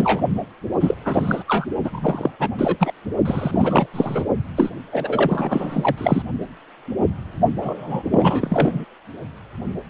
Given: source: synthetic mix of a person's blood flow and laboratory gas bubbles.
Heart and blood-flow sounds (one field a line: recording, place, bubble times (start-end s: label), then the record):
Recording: Doppler ultrasound of blood flow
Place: precordium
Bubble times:
0.00-0.21 s: bubbles
0.79-0.94 s: bubbles
1.05-1.44 s: bubbles
1.47-1.66 s: bubbles
1.84-2.31 s: bubbles
2.39-2.48 s: bubbles
2.58-2.93 s: bubbles
3.25-3.87 s: bubbles
3.93-4.25 s: bubbles
4.56-4.70 s: bubbles
4.92-6.22 s: bubbles
7.60-8.03 s: bubbles
8.10-8.85 s: bubbles
From the record:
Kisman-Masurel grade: 333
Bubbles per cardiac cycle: rolling drumbeat, 9 or more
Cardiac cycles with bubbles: 50 to 99%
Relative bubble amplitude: loud (0.450 to 0.775)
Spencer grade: 3 (all of the cardiac periods contain showers or single bubble signals, but not dominating or overriding the cardiac motion signals)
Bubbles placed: only in the low amplitude regions of the cardiac cycle